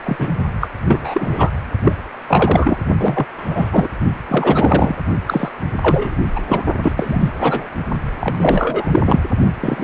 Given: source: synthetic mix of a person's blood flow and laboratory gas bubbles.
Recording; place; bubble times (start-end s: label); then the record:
Doppler ultrasound of blood flow; precordium
0.03-0.28 s: bubbles
0.60-0.68 s: bubbles
0.88-1.50 s: bubbles
1.84-1.93 s: bubbles
2.28-2.78 s: bubbles
2.99-3.25 s: bubbles
3.37-3.88 s: bubbles
4.28-4.95 s: bubbles
5.26-5.49 s: bubbles
5.81-6.15 s: bubbles
6.36-6.41 s: bubbles
6.46-6.64 s: bubbles
6.83-6.94 s: bubbles
6.96-7.30 s: bubbles
7.40-7.67 s: bubbles
8.20-9.00 s: bubbles
9.05-9.20 s: bubbles
9.60-9.84 s: bubbles
From the record:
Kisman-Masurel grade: 343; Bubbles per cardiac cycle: rolling drumbeat, 9 or more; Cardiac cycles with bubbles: 100%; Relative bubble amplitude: loud (0.450 to 0.775); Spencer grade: 3 (all of the cardiac periods contain showers or single bubble signals, but not dominating or overriding the cardiac motion signals); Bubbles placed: only in the low amplitude regions of the cardiac cycle